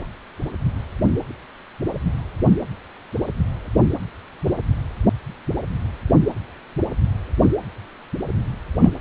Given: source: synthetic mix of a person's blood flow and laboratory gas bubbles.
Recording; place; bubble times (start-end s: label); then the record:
Doppler ultrasound of blood flow; precordium
8.79-8.90 s: bubbles
From the record:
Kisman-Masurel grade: 113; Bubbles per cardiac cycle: 1 to 2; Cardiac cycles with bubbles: 1 to 10%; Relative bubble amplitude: loud (0.450 to 0.775); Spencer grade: 1 (occasional bubble signal discernible with the cardiac motion signal, with majority of cardiac periods free of bubbles); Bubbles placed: anywhere in the cardiac cycle